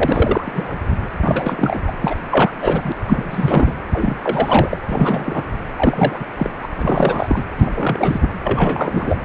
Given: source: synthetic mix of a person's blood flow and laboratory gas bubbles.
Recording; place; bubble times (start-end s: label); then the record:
Doppler ultrasound of blood flow; precordium
0.00-0.77 s: bubbles
1.23-1.82 s: bubbles
1.86-1.92 s: bubbles
2.01-2.14 s: bubbles
2.31-2.51 s: bubbles
2.62-2.92 s: bubbles
3.06-3.75 s: bubbles
3.93-4.20 s: bubbles
4.23-4.69 s: bubbles
4.72-4.77 s: bubbles
4.87-5.43 s: bubbles
5.76-6.26 s: bubbles
6.38-6.50 s: bubbles
6.62-6.67 s: bubbles
6.81-7.43 s: bubbles
7.56-7.72 s: bubbles
7.76-8.29 s: bubbles
8.45-9.17 s: bubbles
From the record:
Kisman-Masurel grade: 342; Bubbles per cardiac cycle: rolling drumbeat, 9 or more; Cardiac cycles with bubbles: 100%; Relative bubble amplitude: moderate (0.250 to 0.450); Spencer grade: 3 (all of the cardiac periods contain showers or single bubble signals, but not dominating or overriding the cardiac motion signals); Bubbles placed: anywhere in the cardiac cycle